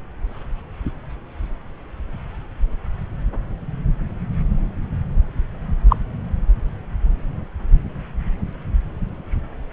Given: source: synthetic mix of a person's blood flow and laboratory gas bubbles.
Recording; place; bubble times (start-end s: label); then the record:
Doppler ultrasound of blood flow; subclavian vein
5.89-5.96 s: bubbles
From the record:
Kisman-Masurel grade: 113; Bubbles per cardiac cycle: 1 to 2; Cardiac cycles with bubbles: 1 to 10%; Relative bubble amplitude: loud (0.450 to 0.775); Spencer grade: 1 (occasional bubble signal discernible with the cardiac motion signal, with majority of cardiac periods free of bubbles); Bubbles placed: anywhere in the cardiac cycle